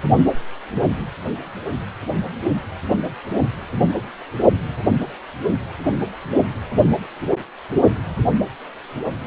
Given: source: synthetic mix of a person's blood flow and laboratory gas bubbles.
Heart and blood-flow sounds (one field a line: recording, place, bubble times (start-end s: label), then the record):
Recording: Doppler ultrasound of blood flow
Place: precordium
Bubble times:
no bubbles
From the record:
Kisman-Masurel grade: 000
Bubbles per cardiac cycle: 0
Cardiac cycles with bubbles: 0%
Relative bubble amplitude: no bubbles discernible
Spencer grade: 0 (complete lack of bubble signals)